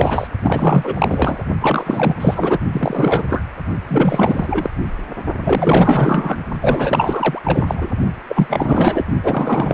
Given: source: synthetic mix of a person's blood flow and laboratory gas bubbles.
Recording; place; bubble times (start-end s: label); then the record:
Doppler ultrasound of blood flow; precordium
0.00-0.28 s: bubbles
0.42-1.44 s: bubbles
1.61-2.14 s: bubbles
2.20-2.59 s: bubbles
2.72-3.25 s: bubbles
3.29-3.42 s: bubbles
3.88-4.71 s: bubbles
5.42-6.37 s: bubbles
6.61-7.90 s: bubbles
8.28-9.04 s: bubbles
9.22-9.74 s: bubbles
From the record:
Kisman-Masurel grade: 444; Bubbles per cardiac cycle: continuous sound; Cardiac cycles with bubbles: 100%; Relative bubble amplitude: maximal (0.775 to 0.999); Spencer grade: 4 (maximum detectable bubble signal sounding continuously throughout systole and diastole of every cardiac period, and overriding the amplitude of the normal cardiac signals); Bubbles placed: only in the low amplitude regions of the cardiac cycle